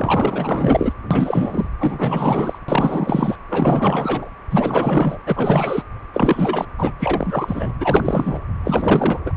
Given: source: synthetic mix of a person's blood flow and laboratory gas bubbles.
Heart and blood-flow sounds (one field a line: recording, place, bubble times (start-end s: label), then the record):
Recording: Doppler ultrasound of blood flow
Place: precordium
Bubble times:
0.00-0.93 s: bubbles
1.10-1.69 s: bubbles
1.79-2.58 s: bubbles
2.68-3.35 s: bubbles
3.49-4.32 s: bubbles
4.50-5.18 s: bubbles
5.25-5.83 s: bubbles
6.14-6.65 s: bubbles
6.78-6.92 s: bubbles
6.99-7.74 s: bubbles
7.80-8.39 s: bubbles
8.63-9.20 s: bubbles
9.24-9.32 s: bubbles
From the record:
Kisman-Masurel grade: 444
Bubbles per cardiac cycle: continuous sound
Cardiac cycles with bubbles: 100%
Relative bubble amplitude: maximal (0.775 to 0.999)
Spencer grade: 4 (maximum detectable bubble signal sounding continuously throughout systole and diastole of every cardiac period, and overriding the amplitude of the normal cardiac signals)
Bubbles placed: anywhere in the cardiac cycle